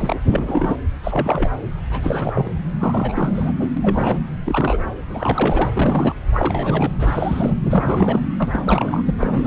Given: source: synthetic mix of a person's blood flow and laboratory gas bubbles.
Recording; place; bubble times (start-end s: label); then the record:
Doppler ultrasound of blood flow; subclavian vein
0.00-0.16 s: bubbles
0.26-0.76 s: bubbles
1.03-1.50 s: bubbles
1.90-2.50 s: bubbles
2.79-3.54 s: bubbles
3.59-3.69 s: bubbles
3.77-4.18 s: bubbles
4.46-4.88 s: bubbles
5.08-6.16 s: bubbles
6.33-6.92 s: bubbles
6.99-7.56 s: bubbles
7.61-8.20 s: bubbles
8.39-8.49 s: bubbles
8.53-9.03 s: bubbles
9.07-9.15 s: bubbles
9.23-9.47 s: bubbles
From the record:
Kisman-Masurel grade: 342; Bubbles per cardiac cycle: rolling drumbeat, 9 or more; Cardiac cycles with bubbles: 100%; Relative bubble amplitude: moderate (0.250 to 0.450); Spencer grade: 3 (all of the cardiac periods contain showers or single bubble signals, but not dominating or overriding the cardiac motion signals); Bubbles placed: anywhere in the cardiac cycle